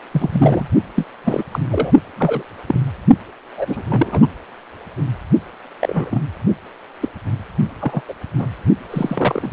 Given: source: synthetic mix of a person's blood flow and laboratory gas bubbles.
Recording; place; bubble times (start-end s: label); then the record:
Doppler ultrasound of blood flow; precordium
0.11-0.69 s: bubbles
0.96-1.06 s: bubbles
1.24-1.44 s: bubbles
1.52-1.59 s: bubbles
1.69-1.92 s: bubbles
2.17-2.43 s: bubbles
2.67-2.80 s: bubbles
3.57-3.83 s: bubbles
3.89-4.28 s: bubbles
5.79-6.21 s: bubbles
7.02-7.08 s: bubbles
7.81-8.01 s: bubbles
8.08-8.13 s: bubbles
8.38-8.46 s: bubbles
8.91-9.50 s: bubbles
From the record:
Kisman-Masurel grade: 243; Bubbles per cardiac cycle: several, 3 to 8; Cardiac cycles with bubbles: 100%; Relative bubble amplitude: loud (0.450 to 0.775); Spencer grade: 3 (all of the cardiac periods contain showers or single bubble signals, but not dominating or overriding the cardiac motion signals); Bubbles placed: only in the low amplitude regions of the cardiac cycle